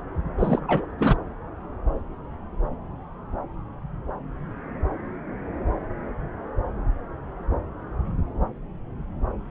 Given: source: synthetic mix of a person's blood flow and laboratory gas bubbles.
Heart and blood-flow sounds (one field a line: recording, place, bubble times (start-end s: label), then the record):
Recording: Doppler ultrasound of blood flow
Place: subclavian vein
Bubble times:
0.39-0.86 s: bubbles
0.98-1.17 s: bubbles
From the record:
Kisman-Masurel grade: 212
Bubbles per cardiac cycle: several, 3 to 8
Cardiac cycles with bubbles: 1 to 10%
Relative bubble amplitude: moderate (0.250 to 0.450)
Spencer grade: 1 (occasional bubble signal discernible with the cardiac motion signal, with majority of cardiac periods free of bubbles)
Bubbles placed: anywhere in the cardiac cycle